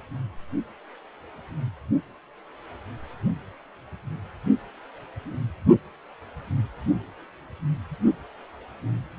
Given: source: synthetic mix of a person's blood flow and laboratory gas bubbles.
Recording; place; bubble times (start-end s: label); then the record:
Doppler ultrasound of blood flow; precordium
no bubbles
From the record:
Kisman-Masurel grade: 000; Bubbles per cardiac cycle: 0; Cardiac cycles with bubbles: 0%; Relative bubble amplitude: no bubbles discernible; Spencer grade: 0 (complete lack of bubble signals)